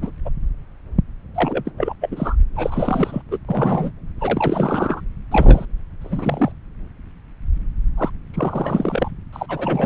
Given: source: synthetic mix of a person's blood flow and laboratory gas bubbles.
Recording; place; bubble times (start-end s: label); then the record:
Doppler ultrasound of blood flow; subclavian vein
0.01-0.10 s: bubbles
0.25-0.29 s: bubbles
1.34-1.71 s: bubbles
1.77-1.93 s: bubbles
2.01-2.35 s: bubbles
2.56-3.22 s: bubbles
3.31-3.38 s: bubbles
3.48-3.91 s: bubbles
4.19-5.01 s: bubbles
5.32-5.65 s: bubbles
6.01-6.52 s: bubbles
7.97-8.10 s: bubbles
8.33-9.11 s: bubbles
9.32-9.86 s: bubbles
From the record:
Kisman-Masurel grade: 333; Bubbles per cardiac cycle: rolling drumbeat, 9 or more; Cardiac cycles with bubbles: 50 to 99%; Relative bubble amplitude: loud (0.450 to 0.775); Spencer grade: 3 (all of the cardiac periods contain showers or single bubble signals, but not dominating or overriding the cardiac motion signals); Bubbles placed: anywhere in the cardiac cycle